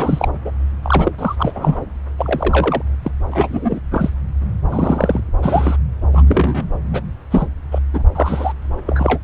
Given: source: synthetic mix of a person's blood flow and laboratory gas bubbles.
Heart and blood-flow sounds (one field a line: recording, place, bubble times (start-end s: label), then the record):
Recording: Doppler ultrasound of blood flow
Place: subclavian vein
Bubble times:
0.00-0.28 s: bubbles
0.44-0.52 s: bubbles
0.82-1.11 s: bubbles
1.18-1.35 s: bubbles
1.38-1.76 s: bubbles
2.18-2.82 s: bubbles
3.03-3.12 s: bubbles
3.31-3.81 s: bubbles
3.91-4.10 s: bubbles
4.70-5.20 s: bubbles
5.42-5.76 s: bubbles
6.12-6.23 s: bubbles
6.26-6.64 s: bubbles
6.93-7.00 s: bubbles
7.30-7.47 s: bubbles
7.71-7.78 s: bubbles
7.93-8.03 s: bubbles
8.15-8.53 s: bubbles
8.62-8.64 s: bubbles
8.87-9.19 s: bubbles
From the record:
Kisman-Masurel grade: 243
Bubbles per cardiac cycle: several, 3 to 8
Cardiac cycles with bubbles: 100%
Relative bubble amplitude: loud (0.450 to 0.775)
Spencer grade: 3 (all of the cardiac periods contain showers or single bubble signals, but not dominating or overriding the cardiac motion signals)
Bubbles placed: anywhere in the cardiac cycle